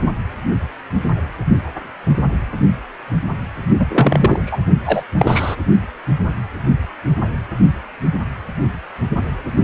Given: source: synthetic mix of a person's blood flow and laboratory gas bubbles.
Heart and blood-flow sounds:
Doppler ultrasound of blood flow; precordium
3.79-4.39 s: bubbles
4.46-4.59 s: bubbles
4.85-5.03 s: bubbles
5.17-5.55 s: bubbles
From the record:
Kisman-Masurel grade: 223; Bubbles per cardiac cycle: several, 3 to 8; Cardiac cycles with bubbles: 10 to 50%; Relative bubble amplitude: loud (0.450 to 0.775); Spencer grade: 2 (many but less than half of the cardiac periods contain bubble signals, singularly or in groups); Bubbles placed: only in the low amplitude regions of the cardiac cycle

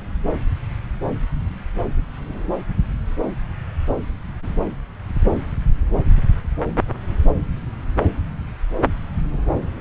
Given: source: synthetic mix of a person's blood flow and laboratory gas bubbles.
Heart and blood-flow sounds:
Doppler ultrasound of blood flow; subclavian vein
no bubbles
From the record:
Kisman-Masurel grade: 000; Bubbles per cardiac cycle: 0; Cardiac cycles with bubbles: 0%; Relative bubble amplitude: no bubbles discernible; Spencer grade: 0 (complete lack of bubble signals)

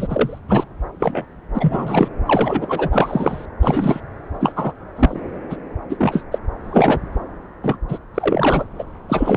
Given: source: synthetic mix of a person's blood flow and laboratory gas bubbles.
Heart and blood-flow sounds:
Doppler ultrasound of blood flow; subclavian vein
0.00-0.39 s: bubbles
0.48-0.64 s: bubbles
1.00-1.25 s: bubbles
1.54-2.08 s: bubbles
2.25-3.46 s: bubbles
3.62-4.00 s: bubbles
4.39-4.53 s: bubbles
4.56-4.72 s: bubbles
4.96-5.20 s: bubbles
5.49-5.57 s: bubbles
5.89-6.23 s: bubbles
6.32-6.38 s: bubbles
6.64-6.99 s: bubbles
7.62-7.79 s: bubbles
7.88-7.98 s: bubbles
8.14-8.64 s: bubbles
8.79-8.84 s: bubbles
9.09-9.37 s: bubbles
From the record:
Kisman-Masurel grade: 243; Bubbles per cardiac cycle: several, 3 to 8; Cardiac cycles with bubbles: 100%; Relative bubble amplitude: loud (0.450 to 0.775); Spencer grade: 3 (all of the cardiac periods contain showers or single bubble signals, but not dominating or overriding the cardiac motion signals); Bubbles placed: anywhere in the cardiac cycle

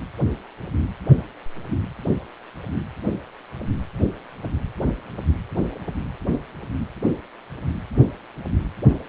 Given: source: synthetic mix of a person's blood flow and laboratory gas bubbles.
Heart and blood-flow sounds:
Doppler ultrasound of blood flow; precordium
no bubbles
From the record:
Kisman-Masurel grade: 000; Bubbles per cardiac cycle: 0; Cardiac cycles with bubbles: 0%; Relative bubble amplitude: no bubbles discernible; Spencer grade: 0 (complete lack of bubble signals)

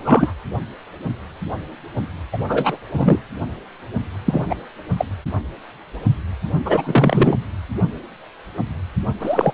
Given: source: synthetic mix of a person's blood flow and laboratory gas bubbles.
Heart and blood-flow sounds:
Doppler ultrasound of blood flow; precordium
0.00-0.34 s: bubbles
2.32-2.38 s: bubbles
2.47-2.77 s: bubbles
2.93-3.19 s: bubbles
4.25-4.45 s: bubbles
4.50-4.56 s: bubbles
4.98-5.05 s: bubbles
6.65-7.37 s: bubbles
9.20-9.52 s: bubbles
From the record:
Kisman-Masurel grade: 223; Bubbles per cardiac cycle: several, 3 to 8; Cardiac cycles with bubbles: 10 to 50%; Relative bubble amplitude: loud (0.450 to 0.775); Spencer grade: 2 (many but less than half of the cardiac periods contain bubble signals, singularly or in groups); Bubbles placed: anywhere in the cardiac cycle

